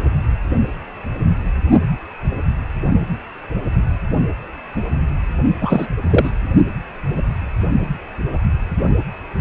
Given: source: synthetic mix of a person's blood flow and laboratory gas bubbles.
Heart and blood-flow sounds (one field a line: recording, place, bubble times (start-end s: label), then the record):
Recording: Doppler ultrasound of blood flow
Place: precordium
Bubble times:
5.60-5.88 s: bubbles
6.10-6.30 s: bubbles
From the record:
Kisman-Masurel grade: 223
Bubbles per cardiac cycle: several, 3 to 8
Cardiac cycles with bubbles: 10 to 50%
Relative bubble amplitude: loud (0.450 to 0.775)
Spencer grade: 2 (many but less than half of the cardiac periods contain bubble signals, singularly or in groups)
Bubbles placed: only in the low amplitude regions of the cardiac cycle